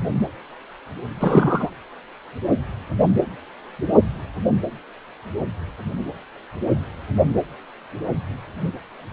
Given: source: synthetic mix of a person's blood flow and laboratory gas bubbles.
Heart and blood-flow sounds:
Doppler ultrasound of blood flow; precordium
1.20-1.70 s: bubbles
From the record:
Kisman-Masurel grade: 213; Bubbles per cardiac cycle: several, 3 to 8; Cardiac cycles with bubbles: 1 to 10%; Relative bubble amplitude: loud (0.450 to 0.775); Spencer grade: 1 (occasional bubble signal discernible with the cardiac motion signal, with majority of cardiac periods free of bubbles); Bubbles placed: anywhere in the cardiac cycle

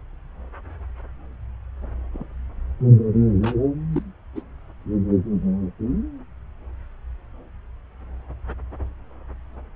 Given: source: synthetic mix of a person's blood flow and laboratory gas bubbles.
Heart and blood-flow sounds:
Doppler ultrasound of blood flow; subclavian vein
2.13-2.27 s: bubbles
3.42-3.56 s: bubbles
3.92-4.03 s: bubbles
4.35-4.42 s: bubbles
From the record:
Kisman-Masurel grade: 121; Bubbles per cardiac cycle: 1 to 2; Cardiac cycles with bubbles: 10 to 50%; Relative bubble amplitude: barely perceptible (0.100 to 0.250); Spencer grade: 2 (many but less than half of the cardiac periods contain bubble signals, singularly or in groups); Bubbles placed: anywhere in the cardiac cycle

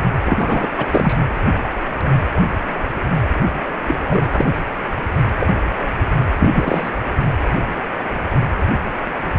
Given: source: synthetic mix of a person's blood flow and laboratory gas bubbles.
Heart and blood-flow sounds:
Doppler ultrasound of blood flow; precordium
0.26-0.69 s: bubbles
0.78-0.86 s: bubbles
0.90-1.15 s: bubbles
3.86-4.23 s: bubbles
4.33-4.46 s: bubbles
5.39-5.48 s: bubbles
6.40-6.91 s: bubbles
From the record:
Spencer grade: 2 (many but less than half of the cardiac periods contain bubble signals, singularly or in groups); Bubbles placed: anywhere in the cardiac cycle

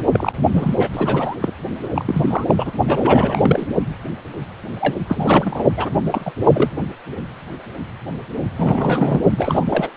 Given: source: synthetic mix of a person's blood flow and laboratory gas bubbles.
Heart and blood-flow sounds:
Doppler ultrasound of blood flow; precordium
0.12-0.39 s: bubbles
0.53-0.76 s: bubbles
0.79-0.90 s: bubbles
0.93-1.36 s: bubbles
1.41-1.52 s: bubbles
1.83-1.88 s: bubbles
1.95-2.45 s: bubbles
2.47-2.72 s: bubbles
2.87-3.67 s: bubbles
4.80-4.97 s: bubbles
5.08-5.64 s: bubbles
5.77-5.90 s: bubbles
6.11-6.32 s: bubbles
6.42-6.71 s: bubbles
8.57-9.20 s: bubbles
9.30-9.65 s: bubbles
9.69-9.90 s: bubbles
From the record:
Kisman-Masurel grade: 333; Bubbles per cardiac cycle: rolling drumbeat, 9 or more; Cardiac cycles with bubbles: 50 to 99%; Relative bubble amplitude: loud (0.450 to 0.775); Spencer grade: 3 (all of the cardiac periods contain showers or single bubble signals, but not dominating or overriding the cardiac motion signals); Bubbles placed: only in the low amplitude regions of the cardiac cycle

